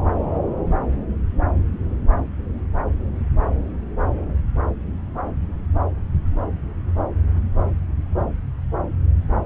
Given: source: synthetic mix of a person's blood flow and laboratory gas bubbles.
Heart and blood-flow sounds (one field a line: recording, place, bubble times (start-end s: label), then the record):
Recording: Doppler ultrasound of blood flow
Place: subclavian vein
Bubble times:
no bubbles
From the record:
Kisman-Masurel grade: 000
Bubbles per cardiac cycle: 0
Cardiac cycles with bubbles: 0%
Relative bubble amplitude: no bubbles discernible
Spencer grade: 0 (complete lack of bubble signals)